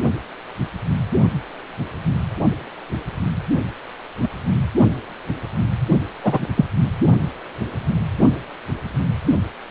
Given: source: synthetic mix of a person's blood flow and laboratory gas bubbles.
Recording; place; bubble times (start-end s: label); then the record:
Doppler ultrasound of blood flow; precordium
4.21-4.29 s: bubbles
6.23-6.46 s: bubbles
6.56-6.65 s: bubbles
From the record:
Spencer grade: 2 (many but less than half of the cardiac periods contain bubble signals, singularly or in groups); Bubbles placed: only in the low amplitude regions of the cardiac cycle